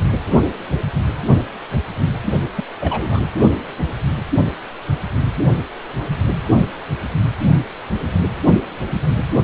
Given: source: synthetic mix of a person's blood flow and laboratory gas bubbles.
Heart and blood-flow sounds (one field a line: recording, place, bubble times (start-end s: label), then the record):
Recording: Doppler ultrasound of blood flow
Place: precordium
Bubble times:
2.56-2.64 s: bubbles
2.81-3.25 s: bubbles
From the record:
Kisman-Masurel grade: 211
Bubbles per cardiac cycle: several, 3 to 8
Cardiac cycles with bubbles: 1 to 10%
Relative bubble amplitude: barely perceptible (0.100 to 0.250)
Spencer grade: 1 (occasional bubble signal discernible with the cardiac motion signal, with majority of cardiac periods free of bubbles)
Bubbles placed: only in the low amplitude regions of the cardiac cycle